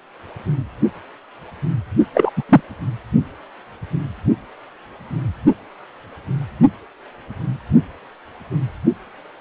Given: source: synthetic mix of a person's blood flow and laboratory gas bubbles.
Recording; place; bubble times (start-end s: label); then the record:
Doppler ultrasound of blood flow; precordium
2.14-2.30 s: bubbles
2.37-2.43 s: bubbles
2.49-2.61 s: bubbles
From the record:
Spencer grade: 1 (occasional bubble signal discernible with the cardiac motion signal, with majority of cardiac periods free of bubbles); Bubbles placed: only in the low amplitude regions of the cardiac cycle